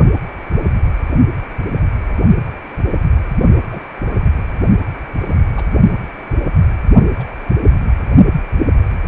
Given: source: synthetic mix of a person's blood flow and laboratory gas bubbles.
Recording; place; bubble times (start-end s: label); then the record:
Doppler ultrasound of blood flow; precordium
2.87-2.99 s: bubbles
3.71-3.81 s: bubbles
5.20-5.41 s: bubbles
5.56-5.63 s: bubbles
7.17-7.24 s: bubbles
From the record:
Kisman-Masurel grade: 121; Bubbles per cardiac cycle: 1 to 2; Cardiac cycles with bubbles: 10 to 50%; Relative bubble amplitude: barely perceptible (0.100 to 0.250); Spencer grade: 2 (many but less than half of the cardiac periods contain bubble signals, singularly or in groups); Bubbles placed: only in the low amplitude regions of the cardiac cycle